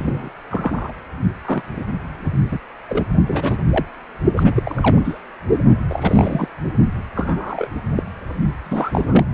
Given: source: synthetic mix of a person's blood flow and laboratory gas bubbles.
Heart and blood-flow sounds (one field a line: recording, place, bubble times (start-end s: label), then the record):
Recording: Doppler ultrasound of blood flow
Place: precordium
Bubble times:
0.00-0.29 s: bubbles
0.51-0.94 s: bubbles
1.45-1.63 s: bubbles
1.76-1.84 s: bubbles
2.51-2.58 s: bubbles
2.88-3.03 s: bubbles
3.27-3.64 s: bubbles
3.67-3.85 s: bubbles
4.36-5.20 s: bubbles
5.90-6.48 s: bubbles
7.15-7.68 s: bubbles
7.96-8.03 s: bubbles
8.64-9.24 s: bubbles
From the record:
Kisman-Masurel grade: 242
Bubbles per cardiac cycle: several, 3 to 8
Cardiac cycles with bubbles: 100%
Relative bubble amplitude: moderate (0.250 to 0.450)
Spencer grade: 3 (all of the cardiac periods contain showers or single bubble signals, but not dominating or overriding the cardiac motion signals)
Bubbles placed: only in the low amplitude regions of the cardiac cycle